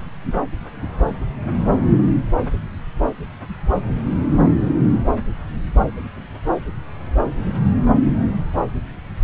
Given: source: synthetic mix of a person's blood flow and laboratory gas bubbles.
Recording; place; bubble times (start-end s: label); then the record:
Doppler ultrasound of blood flow; subclavian vein
no bubbles
From the record:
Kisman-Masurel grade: 000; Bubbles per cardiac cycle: 0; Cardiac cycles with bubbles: 0%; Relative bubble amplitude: no bubbles discernible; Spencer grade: 0 (complete lack of bubble signals)